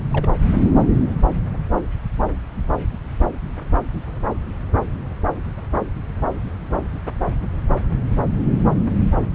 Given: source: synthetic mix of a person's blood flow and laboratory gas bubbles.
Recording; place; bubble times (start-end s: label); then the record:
Doppler ultrasound of blood flow; subclavian vein
0.12-0.28 s: bubbles
From the record:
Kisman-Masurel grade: 111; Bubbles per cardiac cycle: 1 to 2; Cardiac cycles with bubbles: 1 to 10%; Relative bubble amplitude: barely perceptible (0.100 to 0.250); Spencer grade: 1 (occasional bubble signal discernible with the cardiac motion signal, with majority of cardiac periods free of bubbles); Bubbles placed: anywhere in the cardiac cycle